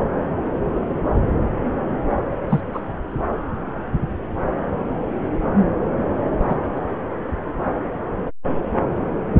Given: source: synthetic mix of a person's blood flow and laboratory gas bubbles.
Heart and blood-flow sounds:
Doppler ultrasound of blood flow; subclavian vein
2.50-2.60 s: bubbles
2.73-2.80 s: bubbles
6.38-6.58 s: bubbles
6.75-6.82 s: bubbles
From the record:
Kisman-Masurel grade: 123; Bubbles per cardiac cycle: 1 to 2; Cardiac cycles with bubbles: 10 to 50%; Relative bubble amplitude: loud (0.450 to 0.775); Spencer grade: 2 (many but less than half of the cardiac periods contain bubble signals, singularly or in groups); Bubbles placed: anywhere in the cardiac cycle

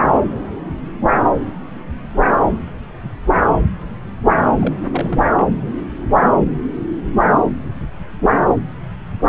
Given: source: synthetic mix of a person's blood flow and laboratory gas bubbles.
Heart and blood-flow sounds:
Doppler ultrasound of blood flow; subclavian vein
4.60-4.74 s: bubbles
4.91-5.27 s: bubbles
5.36-5.50 s: bubbles
From the record:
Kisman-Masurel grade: 212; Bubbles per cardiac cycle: several, 3 to 8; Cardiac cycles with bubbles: 1 to 10%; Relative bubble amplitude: moderate (0.250 to 0.450); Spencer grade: 1 (occasional bubble signal discernible with the cardiac motion signal, with majority of cardiac periods free of bubbles); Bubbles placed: anywhere in the cardiac cycle

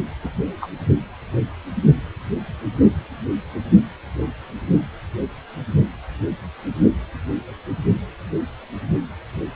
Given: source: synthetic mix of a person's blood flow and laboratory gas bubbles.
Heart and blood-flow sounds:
Doppler ultrasound of blood flow; precordium
0.24-0.29 s: bubbles
0.61-0.69 s: bubbles
From the record:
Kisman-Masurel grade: 112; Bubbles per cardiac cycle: 1 to 2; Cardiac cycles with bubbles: 1 to 10%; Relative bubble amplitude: moderate (0.250 to 0.450); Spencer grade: 1 (occasional bubble signal discernible with the cardiac motion signal, with majority of cardiac periods free of bubbles); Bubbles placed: only in the low amplitude regions of the cardiac cycle

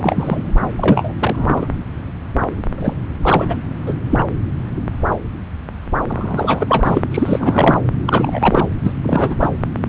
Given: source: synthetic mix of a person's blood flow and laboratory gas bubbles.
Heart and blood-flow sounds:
Doppler ultrasound of blood flow; subclavian vein
0.00-0.53 s: bubbles
0.77-1.12 s: bubbles
1.19-1.68 s: bubbles
2.77-2.94 s: bubbles
3.21-3.56 s: bubbles
3.86-3.94 s: bubbles
4.09-4.23 s: bubbles
6.08-6.99 s: bubbles
7.11-7.79 s: bubbles
8.06-8.65 s: bubbles
8.83-8.93 s: bubbles
9.04-9.36 s: bubbles
9.39-9.48 s: bubbles
From the record:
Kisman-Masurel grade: 233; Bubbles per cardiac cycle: several, 3 to 8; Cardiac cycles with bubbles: 50 to 99%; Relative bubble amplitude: loud (0.450 to 0.775); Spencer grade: 3 (all of the cardiac periods contain showers or single bubble signals, but not dominating or overriding the cardiac motion signals); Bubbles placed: anywhere in the cardiac cycle

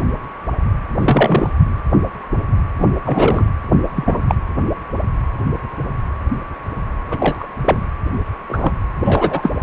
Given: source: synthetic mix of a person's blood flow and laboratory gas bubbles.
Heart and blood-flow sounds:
Doppler ultrasound of blood flow; precordium
0.99-1.52 s: bubbles
2.78-2.86 s: bubbles
3.05-3.47 s: bubbles
3.96-4.22 s: bubbles
4.27-4.35 s: bubbles
7.10-7.46 s: bubbles
7.64-7.86 s: bubbles
8.49-8.73 s: bubbles
9.00-9.51 s: bubbles
From the record:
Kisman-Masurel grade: 233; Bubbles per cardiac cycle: several, 3 to 8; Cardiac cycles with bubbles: 50 to 99%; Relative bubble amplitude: loud (0.450 to 0.775); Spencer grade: 3 (all of the cardiac periods contain showers or single bubble signals, but not dominating or overriding the cardiac motion signals); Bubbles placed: anywhere in the cardiac cycle

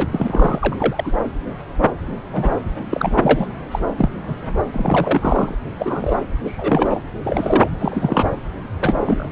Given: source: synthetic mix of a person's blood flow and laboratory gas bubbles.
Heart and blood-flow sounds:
Doppler ultrasound of blood flow; subclavian vein
0.00-0.07 s: bubbles
0.11-0.59 s: bubbles
0.61-1.12 s: bubbles
2.33-2.50 s: bubbles
2.90-3.47 s: bubbles
3.71-3.79 s: bubbles
3.97-4.09 s: bubbles
4.27-4.35 s: bubbles
4.72-5.54 s: bubbles
5.79-6.16 s: bubbles
6.45-7.00 s: bubbles
7.24-7.70 s: bubbles
7.80-8.29 s: bubbles
8.80-8.95 s: bubbles
9.04-9.27 s: bubbles
From the record:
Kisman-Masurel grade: 232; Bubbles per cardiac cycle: several, 3 to 8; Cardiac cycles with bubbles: 50 to 99%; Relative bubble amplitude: moderate (0.250 to 0.450); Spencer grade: 3 (all of the cardiac periods contain showers or single bubble signals, but not dominating or overriding the cardiac motion signals); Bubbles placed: anywhere in the cardiac cycle

